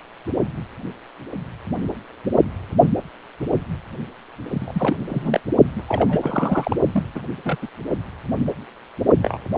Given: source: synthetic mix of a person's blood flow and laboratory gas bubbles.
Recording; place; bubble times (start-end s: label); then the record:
Doppler ultrasound of blood flow; precordium
4.50-4.97 s: bubbles
5.08-5.40 s: bubbles
5.75-5.83 s: bubbles
5.88-6.76 s: bubbles
6.92-7.04 s: bubbles
7.14-7.22 s: bubbles
7.45-7.58 s: bubbles
7.62-7.67 s: bubbles
9.23-9.38 s: bubbles
From the record:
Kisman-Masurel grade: 222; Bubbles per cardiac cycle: several, 3 to 8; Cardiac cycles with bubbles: 10 to 50%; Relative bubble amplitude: moderate (0.250 to 0.450); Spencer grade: 2 (many but less than half of the cardiac periods contain bubble signals, singularly or in groups); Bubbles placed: only in the low amplitude regions of the cardiac cycle